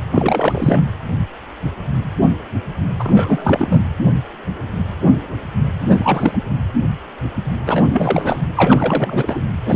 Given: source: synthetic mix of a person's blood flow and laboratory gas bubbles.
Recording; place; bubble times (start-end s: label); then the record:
Doppler ultrasound of blood flow; precordium
0.12-0.83 s: bubbles
2.99-3.81 s: bubbles
5.80-6.38 s: bubbles
7.66-8.43 s: bubbles
8.55-9.41 s: bubbles
9.66-9.76 s: bubbles
From the record:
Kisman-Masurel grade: 333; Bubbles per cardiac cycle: rolling drumbeat, 9 or more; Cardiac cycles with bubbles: 50 to 99%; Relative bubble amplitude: loud (0.450 to 0.775); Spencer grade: 3 (all of the cardiac periods contain showers or single bubble signals, but not dominating or overriding the cardiac motion signals); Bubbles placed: anywhere in the cardiac cycle